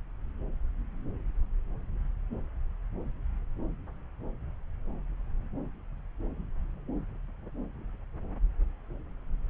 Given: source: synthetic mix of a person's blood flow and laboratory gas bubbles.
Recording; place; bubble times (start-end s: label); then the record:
Doppler ultrasound of blood flow; subclavian vein
no bubbles
From the record:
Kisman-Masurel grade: 000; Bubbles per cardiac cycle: 0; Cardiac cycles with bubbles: 0%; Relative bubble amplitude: no bubbles discernible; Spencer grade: 0 (complete lack of bubble signals)